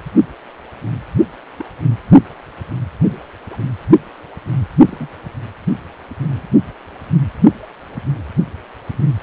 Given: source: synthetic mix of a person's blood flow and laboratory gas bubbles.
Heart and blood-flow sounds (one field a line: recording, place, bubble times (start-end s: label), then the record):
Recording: Doppler ultrasound of blood flow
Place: precordium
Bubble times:
1.59-1.65 s: bubbles
3.01-3.15 s: bubbles
3.50-3.57 s: bubbles
4.85-5.08 s: bubbles
6.21-6.43 s: bubbles
From the record:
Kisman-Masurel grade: 121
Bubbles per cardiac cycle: 1 to 2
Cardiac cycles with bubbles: 10 to 50%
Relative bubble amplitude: barely perceptible (0.100 to 0.250)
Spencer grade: 2 (many but less than half of the cardiac periods contain bubble signals, singularly or in groups)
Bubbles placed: only in the low amplitude regions of the cardiac cycle